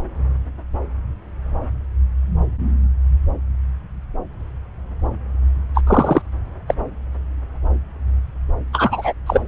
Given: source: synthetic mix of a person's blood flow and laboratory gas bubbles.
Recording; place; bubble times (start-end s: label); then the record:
Doppler ultrasound of blood flow; subclavian vein
5.75-5.82 s: bubbles
5.87-6.22 s: bubbles
6.67-6.75 s: bubbles
8.72-9.13 s: bubbles
9.26-9.41 s: bubbles
From the record:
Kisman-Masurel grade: 223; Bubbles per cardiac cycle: several, 3 to 8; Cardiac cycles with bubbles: 10 to 50%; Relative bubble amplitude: loud (0.450 to 0.775); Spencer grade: 2 (many but less than half of the cardiac periods contain bubble signals, singularly or in groups); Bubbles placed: anywhere in the cardiac cycle